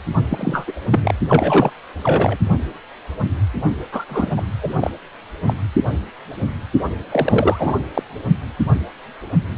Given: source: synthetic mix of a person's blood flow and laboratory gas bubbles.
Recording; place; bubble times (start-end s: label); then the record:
Doppler ultrasound of blood flow; precordium
0.29-0.72 s: bubbles
0.92-1.14 s: bubbles
1.28-1.72 s: bubbles
2.04-2.37 s: bubbles
3.92-4.04 s: bubbles
4.09-4.32 s: bubbles
4.37-4.42 s: bubbles
4.61-4.91 s: bubbles
5.47-5.54 s: bubbles
7.11-7.76 s: bubbles
7.94-8.02 s: bubbles
From the record:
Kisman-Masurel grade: 232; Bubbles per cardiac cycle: several, 3 to 8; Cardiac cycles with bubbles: 50 to 99%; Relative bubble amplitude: moderate (0.250 to 0.450); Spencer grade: 3 (all of the cardiac periods contain showers or single bubble signals, but not dominating or overriding the cardiac motion signals); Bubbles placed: only in the low amplitude regions of the cardiac cycle